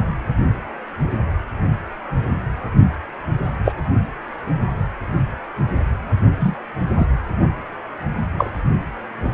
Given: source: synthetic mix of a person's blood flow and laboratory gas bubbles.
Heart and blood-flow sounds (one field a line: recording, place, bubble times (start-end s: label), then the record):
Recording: Doppler ultrasound of blood flow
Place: precordium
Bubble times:
3.65-3.72 s: bubbles
6.39-6.56 s: bubbles
6.98-7.06 s: bubbles
8.38-8.51 s: bubbles
From the record:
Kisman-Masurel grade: 123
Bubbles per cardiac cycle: 1 to 2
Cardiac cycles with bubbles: 10 to 50%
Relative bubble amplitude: loud (0.450 to 0.775)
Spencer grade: 2 (many but less than half of the cardiac periods contain bubble signals, singularly or in groups)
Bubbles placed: only in the low amplitude regions of the cardiac cycle